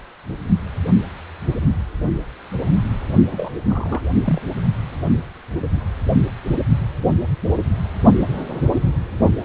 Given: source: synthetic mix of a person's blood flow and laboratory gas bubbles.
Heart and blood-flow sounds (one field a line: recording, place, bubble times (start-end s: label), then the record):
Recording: Doppler ultrasound of blood flow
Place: precordium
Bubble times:
3.31-3.52 s: bubbles
3.68-4.02 s: bubbles
4.25-4.41 s: bubbles
From the record:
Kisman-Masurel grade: 212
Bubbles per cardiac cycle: several, 3 to 8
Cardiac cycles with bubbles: 1 to 10%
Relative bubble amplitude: moderate (0.250 to 0.450)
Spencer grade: 1 (occasional bubble signal discernible with the cardiac motion signal, with majority of cardiac periods free of bubbles)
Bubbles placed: only in the low amplitude regions of the cardiac cycle